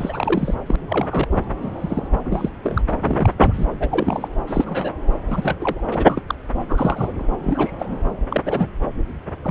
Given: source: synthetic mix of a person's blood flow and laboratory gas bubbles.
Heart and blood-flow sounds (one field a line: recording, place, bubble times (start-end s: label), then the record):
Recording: Doppler ultrasound of blood flow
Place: subclavian vein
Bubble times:
0.00-0.55 s: bubbles
0.67-0.76 s: bubbles
0.88-1.27 s: bubbles
1.62-2.08 s: bubbles
2.25-2.50 s: bubbles
2.62-2.82 s: bubbles
2.88-2.92 s: bubbles
3.02-3.34 s: bubbles
3.38-3.65 s: bubbles
3.79-4.28 s: bubbles
4.47-4.92 s: bubbles
5.30-5.56 s: bubbles
5.61-5.81 s: bubbles
5.90-6.22 s: bubbles
6.29-6.35 s: bubbles
6.69-7.25 s: bubbles
7.41-8.00 s: bubbles
8.30-8.42 s: bubbles
8.45-8.69 s: bubbles
9.44-9.51 s: bubbles
From the record:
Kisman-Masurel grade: 242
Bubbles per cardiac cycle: several, 3 to 8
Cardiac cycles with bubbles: 100%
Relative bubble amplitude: moderate (0.250 to 0.450)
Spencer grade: 3 (all of the cardiac periods contain showers or single bubble signals, but not dominating or overriding the cardiac motion signals)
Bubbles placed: anywhere in the cardiac cycle